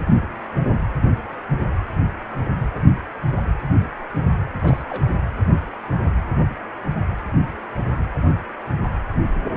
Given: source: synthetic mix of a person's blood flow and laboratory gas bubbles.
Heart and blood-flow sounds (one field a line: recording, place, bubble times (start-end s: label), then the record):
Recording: Doppler ultrasound of blood flow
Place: precordium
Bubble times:
4.49-4.83 s: bubbles
4.90-5.03 s: bubbles
From the record:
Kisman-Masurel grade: 211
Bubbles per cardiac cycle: several, 3 to 8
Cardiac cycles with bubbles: 1 to 10%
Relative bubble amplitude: barely perceptible (0.100 to 0.250)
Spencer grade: 1 (occasional bubble signal discernible with the cardiac motion signal, with majority of cardiac periods free of bubbles)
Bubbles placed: anywhere in the cardiac cycle